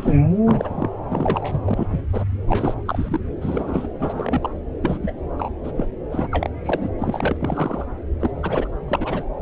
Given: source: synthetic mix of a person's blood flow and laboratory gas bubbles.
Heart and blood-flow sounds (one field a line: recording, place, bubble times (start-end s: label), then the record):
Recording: Doppler ultrasound of blood flow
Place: subclavian vein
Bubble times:
0.00-0.20 s: bubbles
0.45-0.89 s: bubbles
1.09-1.87 s: bubbles
1.90-2.00 s: bubbles
2.12-2.25 s: bubbles
2.48-2.74 s: bubbles
2.85-3.20 s: bubbles
3.41-3.88 s: bubbles
4.00-4.50 s: bubbles
4.81-4.97 s: bubbles
5.02-5.12 s: bubbles
5.38-5.50 s: bubbles
5.63-5.71 s: bubbles
5.75-5.86 s: bubbles
6.11-6.28 s: bubbles
6.31-6.50 s: bubbles
6.63-6.90 s: bubbles
6.98-7.36 s: bubbles
7.39-7.85 s: bubbles
8.20-8.31 s: bubbles
8.43-8.68 s: bubbles
8.88-9.24 s: bubbles
From the record:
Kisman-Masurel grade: 242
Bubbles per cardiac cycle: several, 3 to 8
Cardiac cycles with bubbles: 100%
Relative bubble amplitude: moderate (0.250 to 0.450)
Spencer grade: 3 (all of the cardiac periods contain showers or single bubble signals, but not dominating or overriding the cardiac motion signals)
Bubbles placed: anywhere in the cardiac cycle